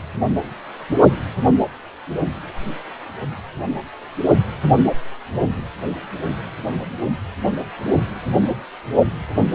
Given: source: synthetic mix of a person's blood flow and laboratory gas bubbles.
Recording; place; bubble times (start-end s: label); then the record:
Doppler ultrasound of blood flow; precordium
no bubbles
From the record:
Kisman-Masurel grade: 000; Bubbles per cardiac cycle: 0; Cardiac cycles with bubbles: 0%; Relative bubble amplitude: no bubbles discernible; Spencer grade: 0 (complete lack of bubble signals)